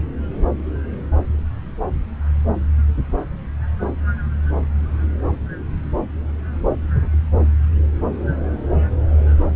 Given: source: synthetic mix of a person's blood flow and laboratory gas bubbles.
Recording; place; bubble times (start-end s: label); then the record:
Doppler ultrasound of blood flow; subclavian vein
no bubbles
From the record:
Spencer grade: 0 (complete lack of bubble signals)